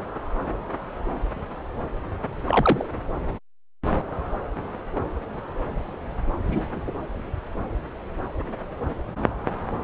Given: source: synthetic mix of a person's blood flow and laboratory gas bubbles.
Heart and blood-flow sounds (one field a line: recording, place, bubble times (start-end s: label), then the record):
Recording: Doppler ultrasound of blood flow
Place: subclavian vein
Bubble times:
2.45-2.85 s: bubbles
6.47-6.84 s: bubbles
From the record:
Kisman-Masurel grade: 122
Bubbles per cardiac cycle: 1 to 2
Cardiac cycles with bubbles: 10 to 50%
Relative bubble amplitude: moderate (0.250 to 0.450)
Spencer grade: 2 (many but less than half of the cardiac periods contain bubble signals, singularly or in groups)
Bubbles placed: anywhere in the cardiac cycle